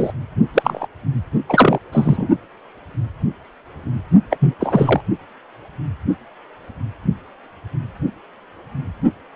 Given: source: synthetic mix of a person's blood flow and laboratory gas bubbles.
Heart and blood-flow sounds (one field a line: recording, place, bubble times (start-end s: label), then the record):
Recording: Doppler ultrasound of blood flow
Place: precordium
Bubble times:
0.00-0.11 s: bubbles
0.53-0.86 s: bubbles
1.49-1.79 s: bubbles
1.92-2.29 s: bubbles
4.31-4.37 s: bubbles
4.40-4.55 s: bubbles
4.60-5.00 s: bubbles
From the record:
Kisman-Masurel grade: 223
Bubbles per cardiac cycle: several, 3 to 8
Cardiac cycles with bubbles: 10 to 50%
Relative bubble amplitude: loud (0.450 to 0.775)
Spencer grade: 2 (many but less than half of the cardiac periods contain bubble signals, singularly or in groups)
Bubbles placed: only in the low amplitude regions of the cardiac cycle